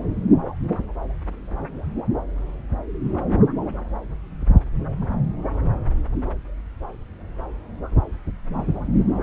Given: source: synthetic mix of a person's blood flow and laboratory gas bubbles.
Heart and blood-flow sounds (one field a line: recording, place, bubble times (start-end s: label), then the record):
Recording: Doppler ultrasound of blood flow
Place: subclavian vein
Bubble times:
no bubbles
From the record:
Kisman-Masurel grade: 000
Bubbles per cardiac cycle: 0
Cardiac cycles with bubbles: 0%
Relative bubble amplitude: no bubbles discernible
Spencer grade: 0 (complete lack of bubble signals)